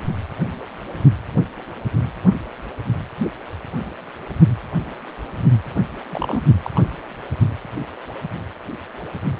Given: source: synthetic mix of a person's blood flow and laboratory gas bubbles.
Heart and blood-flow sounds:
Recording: Doppler ultrasound of blood flow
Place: precordium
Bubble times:
6.11-6.42 s: bubbles
6.62-6.71 s: bubbles
6.75-6.81 s: bubbles
From the record:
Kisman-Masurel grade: 122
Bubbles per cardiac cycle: 1 to 2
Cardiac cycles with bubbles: 10 to 50%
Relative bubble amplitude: moderate (0.250 to 0.450)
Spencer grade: 2 (many but less than half of the cardiac periods contain bubble signals, singularly or in groups)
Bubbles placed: only in the low amplitude regions of the cardiac cycle

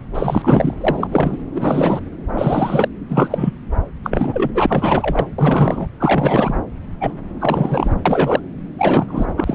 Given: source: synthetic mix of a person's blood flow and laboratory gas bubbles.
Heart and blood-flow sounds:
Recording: Doppler ultrasound of blood flow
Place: subclavian vein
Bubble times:
0.14-0.74 s: bubbles
0.81-1.38 s: bubbles
1.54-2.02 s: bubbles
2.34-2.88 s: bubbles
3.09-3.53 s: bubbles
4.03-5.27 s: bubbles
5.38-5.88 s: bubbles
6.00-6.55 s: bubbles
7.01-7.13 s: bubbles
7.39-7.95 s: bubbles
8.05-8.41 s: bubbles
8.79-9.27 s: bubbles
9.36-9.54 s: bubbles
From the record:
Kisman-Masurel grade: 343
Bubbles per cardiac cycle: rolling drumbeat, 9 or more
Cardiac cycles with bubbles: 100%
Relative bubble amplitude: loud (0.450 to 0.775)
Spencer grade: 3 (all of the cardiac periods contain showers or single bubble signals, but not dominating or overriding the cardiac motion signals)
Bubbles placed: anywhere in the cardiac cycle

